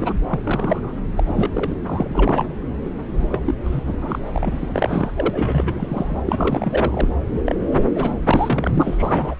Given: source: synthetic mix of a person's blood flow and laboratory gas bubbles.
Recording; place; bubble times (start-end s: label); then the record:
Doppler ultrasound of blood flow; subclavian vein
0.00-0.13 s: bubbles
0.30-0.40 s: bubbles
0.43-0.98 s: bubbles
1.17-1.23 s: bubbles
1.27-1.48 s: bubbles
1.55-1.77 s: bubbles
1.85-2.55 s: bubbles
3.13-3.41 s: bubbles
3.45-3.54 s: bubbles
3.65-3.80 s: bubbles
3.87-3.94 s: bubbles
4.00-4.19 s: bubbles
4.33-5.12 s: bubbles
5.17-5.30 s: bubbles
5.33-6.21 s: bubbles
6.25-7.08 s: bubbles
7.46-7.55 s: bubbles
7.71-7.84 s: bubbles
7.95-8.14 s: bubbles
8.24-8.71 s: bubbles
8.74-9.35 s: bubbles
From the record:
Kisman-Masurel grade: 342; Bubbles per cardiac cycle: rolling drumbeat, 9 or more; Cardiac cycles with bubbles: 100%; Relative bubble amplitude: moderate (0.250 to 0.450); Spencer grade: 3 (all of the cardiac periods contain showers or single bubble signals, but not dominating or overriding the cardiac motion signals); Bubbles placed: anywhere in the cardiac cycle